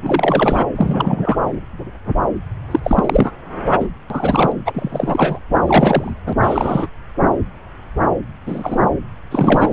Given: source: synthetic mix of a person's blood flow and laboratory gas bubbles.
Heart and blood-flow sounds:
Doppler ultrasound of blood flow; subclavian vein
0.00-0.65 s: bubbles
0.76-1.38 s: bubbles
2.71-2.79 s: bubbles
2.83-3.31 s: bubbles
3.79-3.88 s: bubbles
4.10-4.52 s: bubbles
4.66-5.39 s: bubbles
5.66-6.12 s: bubbles
6.26-6.33 s: bubbles
6.42-6.87 s: bubbles
8.46-8.78 s: bubbles
9.31-9.72 s: bubbles
From the record:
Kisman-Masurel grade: 233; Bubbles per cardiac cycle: several, 3 to 8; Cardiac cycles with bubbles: 50 to 99%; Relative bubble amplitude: loud (0.450 to 0.775); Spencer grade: 3 (all of the cardiac periods contain showers or single bubble signals, but not dominating or overriding the cardiac motion signals); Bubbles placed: anywhere in the cardiac cycle

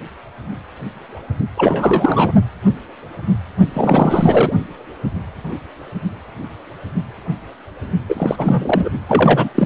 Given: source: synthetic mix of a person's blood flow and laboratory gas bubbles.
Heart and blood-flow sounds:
Doppler ultrasound of blood flow; precordium
1.57-2.32 s: bubbles
3.73-4.53 s: bubbles
8.08-8.89 s: bubbles
9.08-9.49 s: bubbles
9.54-9.66 s: bubbles
From the record:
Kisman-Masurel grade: 333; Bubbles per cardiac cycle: rolling drumbeat, 9 or more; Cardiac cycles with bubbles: 50 to 99%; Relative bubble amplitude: loud (0.450 to 0.775); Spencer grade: 3 (all of the cardiac periods contain showers or single bubble signals, but not dominating or overriding the cardiac motion signals); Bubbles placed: only in the low amplitude regions of the cardiac cycle

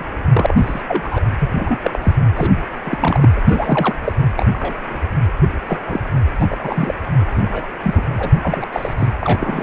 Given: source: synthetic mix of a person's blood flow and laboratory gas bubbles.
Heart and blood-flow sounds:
Doppler ultrasound of blood flow; precordium
0.00-0.05 s: bubbles
0.34-0.82 s: bubbles
0.88-1.21 s: bubbles
1.40-1.79 s: bubbles
1.83-1.99 s: bubbles
2.02-2.14 s: bubbles
2.36-2.52 s: bubbles
2.85-2.98 s: bubbles
3.01-3.29 s: bubbles
3.36-3.41 s: bubbles
3.47-3.94 s: bubbles
4.01-4.12 s: bubbles
4.37-4.46 s: bubbles
4.48-4.77 s: bubbles
4.89-4.98 s: bubbles
5.41-5.47 s: bubbles
5.68-5.77 s: bubbles
5.86-6.00 s: bubbles
6.39-6.94 s: bubbles
7.35-7.67 s: bubbles
7.83-8.02 s: bubbles
8.17-8.31 s: bubbles
8.42-8.67 s: bubbles
8.72-8.94 s: bubbles
8.97-9.08 s: bubbles
9.21-9.63 s: bubbles
From the record:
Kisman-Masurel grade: 242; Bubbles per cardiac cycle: several, 3 to 8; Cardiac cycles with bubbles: 100%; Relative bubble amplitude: moderate (0.250 to 0.450); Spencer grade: 3 (all of the cardiac periods contain showers or single bubble signals, but not dominating or overriding the cardiac motion signals); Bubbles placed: anywhere in the cardiac cycle

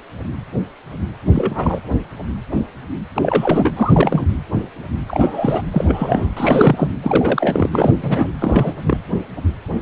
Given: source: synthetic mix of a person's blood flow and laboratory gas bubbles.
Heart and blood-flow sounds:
Doppler ultrasound of blood flow; precordium
1.32-1.80 s: bubbles
3.16-3.72 s: bubbles
3.76-4.25 s: bubbles
5.06-5.62 s: bubbles
5.71-6.29 s: bubbles
6.37-6.90 s: bubbles
7.03-8.28 s: bubbles
8.41-8.73 s: bubbles
8.82-8.97 s: bubbles
From the record:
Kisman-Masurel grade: 332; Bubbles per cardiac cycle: rolling drumbeat, 9 or more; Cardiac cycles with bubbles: 50 to 99%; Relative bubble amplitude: moderate (0.250 to 0.450); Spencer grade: 3 (all of the cardiac periods contain showers or single bubble signals, but not dominating or overriding the cardiac motion signals); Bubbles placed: anywhere in the cardiac cycle

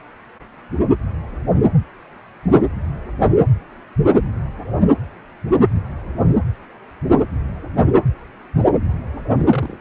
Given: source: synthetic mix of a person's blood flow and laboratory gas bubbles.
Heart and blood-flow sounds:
Doppler ultrasound of blood flow; precordium
9.51-9.76 s: bubbles
From the record:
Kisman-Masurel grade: 112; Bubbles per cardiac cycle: 1 to 2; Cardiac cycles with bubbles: 1 to 10%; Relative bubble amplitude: moderate (0.250 to 0.450); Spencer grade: 1 (occasional bubble signal discernible with the cardiac motion signal, with majority of cardiac periods free of bubbles); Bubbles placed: anywhere in the cardiac cycle

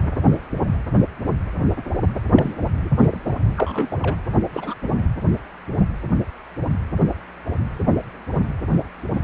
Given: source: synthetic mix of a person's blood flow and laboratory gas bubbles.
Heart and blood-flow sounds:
Doppler ultrasound of blood flow; precordium
2.31-2.53 s: bubbles
2.77-2.89 s: bubbles
2.98-3.18 s: bubbles
3.27-3.36 s: bubbles
3.56-3.98 s: bubbles
4.03-4.16 s: bubbles
4.54-4.75 s: bubbles
4.83-4.91 s: bubbles
4.98-5.02 s: bubbles
From the record:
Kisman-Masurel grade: 221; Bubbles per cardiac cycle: several, 3 to 8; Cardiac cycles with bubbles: 10 to 50%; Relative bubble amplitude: barely perceptible (0.100 to 0.250); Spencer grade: 2 (many but less than half of the cardiac periods contain bubble signals, singularly or in groups); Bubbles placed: anywhere in the cardiac cycle

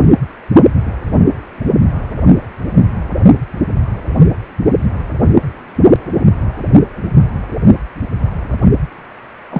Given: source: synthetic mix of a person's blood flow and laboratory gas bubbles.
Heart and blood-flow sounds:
Doppler ultrasound of blood flow; precordium
9.51-9.60 s: bubbles
From the record:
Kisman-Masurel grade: 113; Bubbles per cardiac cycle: 1 to 2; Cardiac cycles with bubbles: 1 to 10%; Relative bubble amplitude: loud (0.450 to 0.775); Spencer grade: 1 (occasional bubble signal discernible with the cardiac motion signal, with majority of cardiac periods free of bubbles); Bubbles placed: anywhere in the cardiac cycle

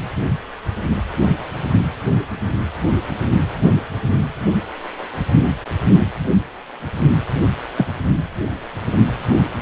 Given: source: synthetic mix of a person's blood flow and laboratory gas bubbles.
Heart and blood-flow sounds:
Doppler ultrasound of blood flow; precordium
7.76-7.87 s: bubbles
From the record:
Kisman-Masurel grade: 123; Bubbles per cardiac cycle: 1 to 2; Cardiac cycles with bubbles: 10 to 50%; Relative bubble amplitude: loud (0.450 to 0.775); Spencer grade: 2 (many but less than half of the cardiac periods contain bubble signals, singularly or in groups); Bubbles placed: only in the low amplitude regions of the cardiac cycle

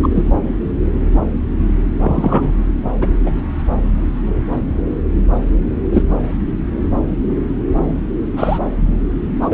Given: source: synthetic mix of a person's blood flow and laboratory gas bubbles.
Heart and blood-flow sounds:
Doppler ultrasound of blood flow; subclavian vein
0.02-0.09 s: bubbles
0.15-0.23 s: bubbles
2.02-2.52 s: bubbles
3.00-3.07 s: bubbles
3.25-3.31 s: bubbles
5.92-6.02 s: bubbles
8.37-8.59 s: bubbles
9.41-9.54 s: bubbles
From the record:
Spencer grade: 2 (many but less than half of the cardiac periods contain bubble signals, singularly or in groups); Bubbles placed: anywhere in the cardiac cycle

